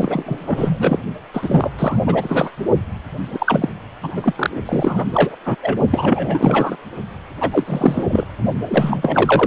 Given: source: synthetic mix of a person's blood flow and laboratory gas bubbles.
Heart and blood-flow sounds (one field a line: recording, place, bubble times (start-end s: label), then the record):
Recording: Doppler ultrasound of blood flow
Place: precordium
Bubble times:
0.00-1.00 s: bubbles
1.34-1.70 s: bubbles
1.78-2.01 s: bubbles
2.06-2.50 s: bubbles
3.27-3.69 s: bubbles
4.02-4.50 s: bubbles
4.66-5.04 s: bubbles
5.13-5.35 s: bubbles
5.45-5.56 s: bubbles
5.61-5.78 s: bubbles
5.90-6.76 s: bubbles
7.41-7.64 s: bubbles
7.66-8.03 s: bubbles
8.07-8.24 s: bubbles
8.68-9.47 s: bubbles
From the record:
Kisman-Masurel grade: 333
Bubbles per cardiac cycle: rolling drumbeat, 9 or more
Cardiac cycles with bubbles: 50 to 99%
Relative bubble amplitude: loud (0.450 to 0.775)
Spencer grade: 3 (all of the cardiac periods contain showers or single bubble signals, but not dominating or overriding the cardiac motion signals)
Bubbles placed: only in the low amplitude regions of the cardiac cycle